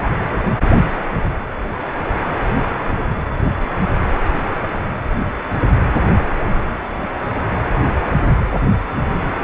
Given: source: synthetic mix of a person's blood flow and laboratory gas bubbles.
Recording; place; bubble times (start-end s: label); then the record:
Doppler ultrasound of blood flow; precordium
no bubbles
From the record:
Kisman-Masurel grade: 000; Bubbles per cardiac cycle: 0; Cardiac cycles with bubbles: 0%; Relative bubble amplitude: no bubbles discernible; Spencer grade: 0 (complete lack of bubble signals)